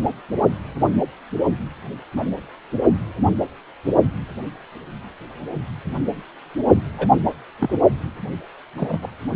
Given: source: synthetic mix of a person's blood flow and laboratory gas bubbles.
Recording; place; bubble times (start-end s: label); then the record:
Doppler ultrasound of blood flow; precordium
2.17-2.24 s: bubbles
6.98-7.08 s: bubbles
7.59-7.74 s: bubbles
8.78-8.99 s: bubbles
9.02-9.10 s: bubbles
From the record:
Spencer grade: 2 (many but less than half of the cardiac periods contain bubble signals, singularly or in groups); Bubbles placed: only in the low amplitude regions of the cardiac cycle